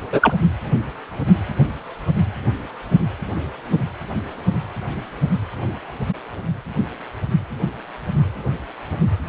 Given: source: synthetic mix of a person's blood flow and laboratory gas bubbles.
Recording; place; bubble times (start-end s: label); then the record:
Doppler ultrasound of blood flow; precordium
0.12-0.33 s: bubbles
From the record:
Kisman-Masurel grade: 113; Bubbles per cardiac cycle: 1 to 2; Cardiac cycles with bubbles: 1 to 10%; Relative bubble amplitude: loud (0.450 to 0.775); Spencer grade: 1 (occasional bubble signal discernible with the cardiac motion signal, with majority of cardiac periods free of bubbles); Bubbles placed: anywhere in the cardiac cycle